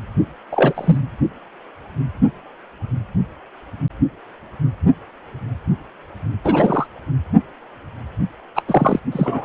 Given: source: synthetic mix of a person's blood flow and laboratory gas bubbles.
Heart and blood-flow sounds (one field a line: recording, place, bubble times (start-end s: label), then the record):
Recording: Doppler ultrasound of blood flow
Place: precordium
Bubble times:
0.52-0.98 s: bubbles
6.44-6.87 s: bubbles
8.55-8.62 s: bubbles
8.68-8.99 s: bubbles
9.12-9.45 s: bubbles
From the record:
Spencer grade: 2 (many but less than half of the cardiac periods contain bubble signals, singularly or in groups)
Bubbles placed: only in the low amplitude regions of the cardiac cycle